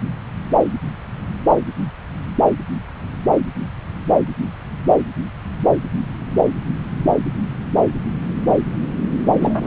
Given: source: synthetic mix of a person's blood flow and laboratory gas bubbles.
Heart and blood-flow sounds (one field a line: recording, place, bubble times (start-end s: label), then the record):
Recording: Doppler ultrasound of blood flow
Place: subclavian vein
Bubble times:
9.40-9.67 s: bubbles
From the record:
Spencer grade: 2 (many but less than half of the cardiac periods contain bubble signals, singularly or in groups)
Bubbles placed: anywhere in the cardiac cycle